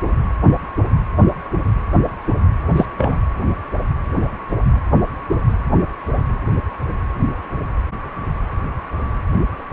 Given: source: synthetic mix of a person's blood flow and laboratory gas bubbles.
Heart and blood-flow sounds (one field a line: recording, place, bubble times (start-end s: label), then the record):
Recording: Doppler ultrasound of blood flow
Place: precordium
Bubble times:
2.75-2.85 s: bubbles
2.97-3.16 s: bubbles
From the record:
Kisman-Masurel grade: 113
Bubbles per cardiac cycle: 1 to 2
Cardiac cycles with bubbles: 1 to 10%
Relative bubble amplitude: loud (0.450 to 0.775)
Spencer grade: 1 (occasional bubble signal discernible with the cardiac motion signal, with majority of cardiac periods free of bubbles)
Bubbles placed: anywhere in the cardiac cycle